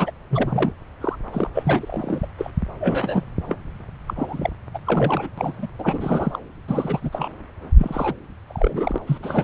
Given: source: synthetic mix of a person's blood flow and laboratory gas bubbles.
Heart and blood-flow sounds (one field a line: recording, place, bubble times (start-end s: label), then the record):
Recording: Doppler ultrasound of blood flow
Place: subclavian vein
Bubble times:
0.00-0.11 s: bubbles
0.30-0.72 s: bubbles
1.01-1.16 s: bubbles
1.32-1.50 s: bubbles
1.54-2.26 s: bubbles
2.38-2.50 s: bubbles
2.79-3.23 s: bubbles
3.46-3.59 s: bubbles
4.07-4.50 s: bubbles
4.74-4.79 s: bubbles
4.85-5.30 s: bubbles
5.38-5.67 s: bubbles
5.79-6.39 s: bubbles
6.67-7.29 s: bubbles
7.78-8.14 s: bubbles
8.47-8.98 s: bubbles
9.06-9.18 s: bubbles
9.22-9.44 s: bubbles
From the record:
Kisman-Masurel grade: 342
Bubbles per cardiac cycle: rolling drumbeat, 9 or more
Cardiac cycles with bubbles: 100%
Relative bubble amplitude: moderate (0.250 to 0.450)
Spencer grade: 3 (all of the cardiac periods contain showers or single bubble signals, but not dominating or overriding the cardiac motion signals)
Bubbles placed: anywhere in the cardiac cycle